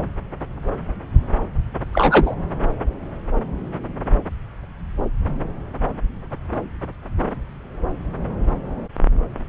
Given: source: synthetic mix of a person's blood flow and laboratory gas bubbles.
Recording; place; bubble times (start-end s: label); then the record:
Doppler ultrasound of blood flow; subclavian vein
1.92-2.35 s: bubbles
From the record:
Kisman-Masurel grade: 123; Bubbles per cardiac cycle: 1 to 2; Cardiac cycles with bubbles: 10 to 50%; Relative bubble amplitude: loud (0.450 to 0.775); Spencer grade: 2 (many but less than half of the cardiac periods contain bubble signals, singularly or in groups); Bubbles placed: anywhere in the cardiac cycle